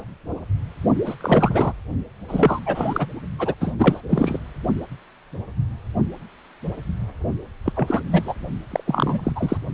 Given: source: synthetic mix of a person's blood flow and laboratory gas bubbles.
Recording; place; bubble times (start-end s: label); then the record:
Doppler ultrasound of blood flow; precordium
1.05-1.15 s: bubbles
1.21-1.73 s: bubbles
2.29-2.60 s: bubbles
2.65-3.06 s: bubbles
3.38-3.54 s: bubbles
3.60-3.73 s: bubbles
3.78-4.01 s: bubbles
4.09-4.39 s: bubbles
7.64-7.73 s: bubbles
7.75-8.01 s: bubbles
8.12-8.34 s: bubbles
8.71-8.84 s: bubbles
8.86-9.32 s: bubbles
9.36-9.57 s: bubbles
From the record:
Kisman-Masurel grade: 332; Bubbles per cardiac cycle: rolling drumbeat, 9 or more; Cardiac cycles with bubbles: 50 to 99%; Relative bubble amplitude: moderate (0.250 to 0.450); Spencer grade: 3 (all of the cardiac periods contain showers or single bubble signals, but not dominating or overriding the cardiac motion signals); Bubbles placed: only in the low amplitude regions of the cardiac cycle